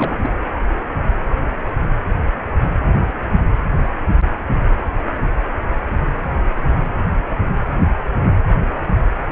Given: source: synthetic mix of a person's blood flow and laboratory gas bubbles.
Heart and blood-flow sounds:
Doppler ultrasound of blood flow; precordium
0.00-0.17 s: bubbles
0.22-0.32 s: bubbles
From the record:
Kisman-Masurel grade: 212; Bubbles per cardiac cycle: several, 3 to 8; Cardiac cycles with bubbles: 1 to 10%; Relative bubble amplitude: moderate (0.250 to 0.450); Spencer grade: 1 (occasional bubble signal discernible with the cardiac motion signal, with majority of cardiac periods free of bubbles); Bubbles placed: anywhere in the cardiac cycle

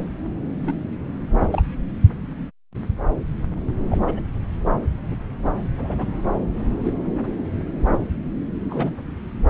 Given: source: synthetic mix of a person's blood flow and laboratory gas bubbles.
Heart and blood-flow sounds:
Doppler ultrasound of blood flow; subclavian vein
0.66-0.75 s: bubbles
1.51-1.63 s: bubbles
3.90-3.98 s: bubbles
4.04-4.20 s: bubbles
5.10-5.16 s: bubbles
5.78-6.13 s: bubbles
6.83-6.93 s: bubbles
8.69-8.96 s: bubbles
From the record:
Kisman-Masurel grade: 121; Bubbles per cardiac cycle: 1 to 2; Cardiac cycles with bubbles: 10 to 50%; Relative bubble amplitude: barely perceptible (0.100 to 0.250); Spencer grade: 2 (many but less than half of the cardiac periods contain bubble signals, singularly or in groups); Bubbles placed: anywhere in the cardiac cycle

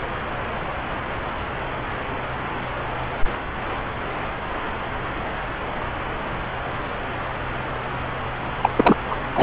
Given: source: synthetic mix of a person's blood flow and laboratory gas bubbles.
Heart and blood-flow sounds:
Doppler ultrasound of blood flow; subclavian vein
8.62-8.70 s: bubbles
8.76-8.95 s: bubbles
9.09-9.17 s: bubbles
9.35-9.43 s: bubbles
From the record:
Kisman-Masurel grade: 213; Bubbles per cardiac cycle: several, 3 to 8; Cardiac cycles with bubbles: 1 to 10%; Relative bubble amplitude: loud (0.450 to 0.775); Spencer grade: 1 (occasional bubble signal discernible with the cardiac motion signal, with majority of cardiac periods free of bubbles); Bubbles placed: anywhere in the cardiac cycle

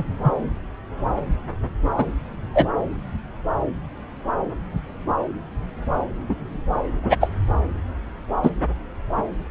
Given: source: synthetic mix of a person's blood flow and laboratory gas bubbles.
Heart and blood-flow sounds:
Doppler ultrasound of blood flow; subclavian vein
0.00-0.03 s: bubbles
0.24-0.32 s: bubbles
1.96-2.05 s: bubbles
2.54-2.66 s: bubbles
6.29-6.35 s: bubbles
7.03-7.16 s: bubbles
7.20-7.30 s: bubbles
8.43-8.50 s: bubbles
From the record:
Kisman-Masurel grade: 123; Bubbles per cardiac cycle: 1 to 2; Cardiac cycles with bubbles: 10 to 50%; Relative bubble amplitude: loud (0.450 to 0.775); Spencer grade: 2 (many but less than half of the cardiac periods contain bubble signals, singularly or in groups); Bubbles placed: anywhere in the cardiac cycle

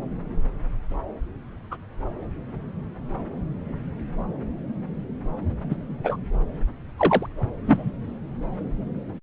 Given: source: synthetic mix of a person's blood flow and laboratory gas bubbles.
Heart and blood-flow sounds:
Doppler ultrasound of blood flow; subclavian vein
1.71-1.76 s: bubbles
5.70-5.75 s: bubbles
6.04-6.16 s: bubbles
6.97-7.26 s: bubbles
7.67-7.92 s: bubbles
From the record:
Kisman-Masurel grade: 123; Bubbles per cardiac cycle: 1 to 2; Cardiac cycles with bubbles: 10 to 50%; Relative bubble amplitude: loud (0.450 to 0.775); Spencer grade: 2 (many but less than half of the cardiac periods contain bubble signals, singularly or in groups); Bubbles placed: anywhere in the cardiac cycle

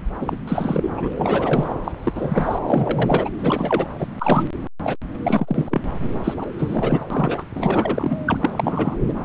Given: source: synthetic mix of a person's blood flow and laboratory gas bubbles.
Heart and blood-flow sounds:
Doppler ultrasound of blood flow; subclavian vein
0.21-0.37 s: bubbles
0.48-0.89 s: bubbles
0.96-1.12 s: bubbles
1.18-1.74 s: bubbles
1.84-1.92 s: bubbles
2.04-2.58 s: bubbles
2.67-3.29 s: bubbles
3.39-3.88 s: bubbles
3.98-4.07 s: bubbles
4.19-4.44 s: bubbles
4.82-4.96 s: bubbles
5.23-5.81 s: bubbles
6.00-6.07 s: bubbles
6.23-6.34 s: bubbles
6.37-6.47 s: bubbles
6.58-7.04 s: bubbles
7.10-7.44 s: bubbles
7.53-8.17 s: bubbles
8.25-8.37 s: bubbles
8.40-8.96 s: bubbles
9.08-9.14 s: bubbles
From the record:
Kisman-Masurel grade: 333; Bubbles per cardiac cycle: rolling drumbeat, 9 or more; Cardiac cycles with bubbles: 50 to 99%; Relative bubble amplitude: loud (0.450 to 0.775); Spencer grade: 3 (all of the cardiac periods contain showers or single bubble signals, but not dominating or overriding the cardiac motion signals); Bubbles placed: anywhere in the cardiac cycle

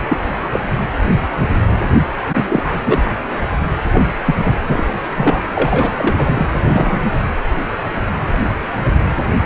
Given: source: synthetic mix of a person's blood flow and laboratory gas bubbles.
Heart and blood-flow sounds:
Doppler ultrasound of blood flow; precordium
0.10-0.17 s: bubbles
0.52-0.59 s: bubbles
2.33-2.63 s: bubbles
2.66-3.04 s: bubbles
3.95-4.01 s: bubbles
4.24-4.35 s: bubbles
4.38-4.54 s: bubbles
4.69-4.85 s: bubbles
5.17-5.42 s: bubbles
5.55-6.46 s: bubbles
6.53-6.59 s: bubbles
6.64-7.02 s: bubbles
From the record:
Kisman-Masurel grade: 233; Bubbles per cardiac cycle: several, 3 to 8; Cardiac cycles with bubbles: 50 to 99%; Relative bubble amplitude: loud (0.450 to 0.775); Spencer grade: 3 (all of the cardiac periods contain showers or single bubble signals, but not dominating or overriding the cardiac motion signals); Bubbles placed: anywhere in the cardiac cycle

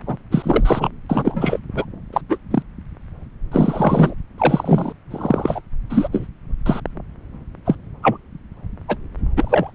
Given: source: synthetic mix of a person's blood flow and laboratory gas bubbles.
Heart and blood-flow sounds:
Doppler ultrasound of blood flow; subclavian vein
0.02-0.22 s: bubbles
0.31-0.90 s: bubbles
1.09-1.59 s: bubbles
1.75-1.85 s: bubbles
2.12-2.21 s: bubbles
2.29-2.38 s: bubbles
2.50-2.62 s: bubbles
3.52-4.15 s: bubbles
4.38-4.93 s: bubbles
5.11-5.61 s: bubbles
5.90-6.08 s: bubbles
6.12-6.27 s: bubbles
6.66-6.80 s: bubbles
7.65-7.76 s: bubbles
8.02-8.18 s: bubbles
8.88-8.96 s: bubbles
9.36-9.71 s: bubbles
From the record:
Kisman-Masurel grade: 243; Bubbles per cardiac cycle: several, 3 to 8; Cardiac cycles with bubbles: 100%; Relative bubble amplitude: loud (0.450 to 0.775); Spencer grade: 3 (all of the cardiac periods contain showers or single bubble signals, but not dominating or overriding the cardiac motion signals); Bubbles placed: anywhere in the cardiac cycle

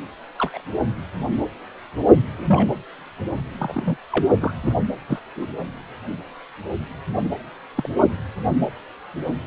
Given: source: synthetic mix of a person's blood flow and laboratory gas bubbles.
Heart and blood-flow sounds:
Doppler ultrasound of blood flow; precordium
0.39-0.61 s: bubbles
2.38-2.71 s: bubbles
3.58-3.97 s: bubbles
4.11-4.25 s: bubbles
4.40-4.52 s: bubbles
4.62-4.74 s: bubbles
5.08-5.19 s: bubbles
5.36-5.49 s: bubbles
7.75-7.89 s: bubbles
From the record:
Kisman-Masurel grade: 122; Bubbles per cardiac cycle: 1 to 2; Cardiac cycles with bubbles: 10 to 50%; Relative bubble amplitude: moderate (0.250 to 0.450); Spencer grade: 2 (many but less than half of the cardiac periods contain bubble signals, singularly or in groups); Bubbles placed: anywhere in the cardiac cycle

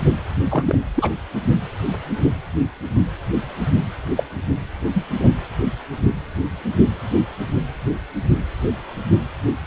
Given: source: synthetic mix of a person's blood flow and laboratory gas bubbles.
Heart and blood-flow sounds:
Doppler ultrasound of blood flow; precordium
0.49-0.79 s: bubbles
0.95-1.10 s: bubbles
4.17-4.23 s: bubbles
4.94-5.04 s: bubbles
5.14-5.29 s: bubbles
From the record:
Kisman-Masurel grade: 122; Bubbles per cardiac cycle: 1 to 2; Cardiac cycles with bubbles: 10 to 50%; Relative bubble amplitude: moderate (0.250 to 0.450); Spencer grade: 2 (many but less than half of the cardiac periods contain bubble signals, singularly or in groups); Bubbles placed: anywhere in the cardiac cycle

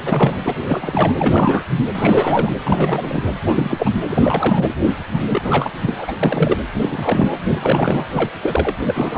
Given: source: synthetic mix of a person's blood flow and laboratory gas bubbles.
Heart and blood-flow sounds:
Doppler ultrasound of blood flow; precordium
0.02-0.38 s: bubbles
0.44-0.54 s: bubbles
0.59-1.64 s: bubbles
1.94-2.55 s: bubbles
2.63-3.23 s: bubbles
3.46-3.90 s: bubbles
4.08-4.68 s: bubbles
5.13-5.25 s: bubbles
5.27-5.70 s: bubbles
5.80-5.96 s: bubbles
5.98-6.12 s: bubbles
6.22-6.58 s: bubbles
6.74-7.38 s: bubbles
7.46-8.04 s: bubbles
8.11-8.31 s: bubbles
8.43-8.75 s: bubbles
8.79-9.18 s: bubbles
From the record:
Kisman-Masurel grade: 343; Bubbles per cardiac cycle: rolling drumbeat, 9 or more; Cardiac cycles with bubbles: 100%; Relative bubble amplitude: loud (0.450 to 0.775); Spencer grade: 3 (all of the cardiac periods contain showers or single bubble signals, but not dominating or overriding the cardiac motion signals); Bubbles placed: anywhere in the cardiac cycle

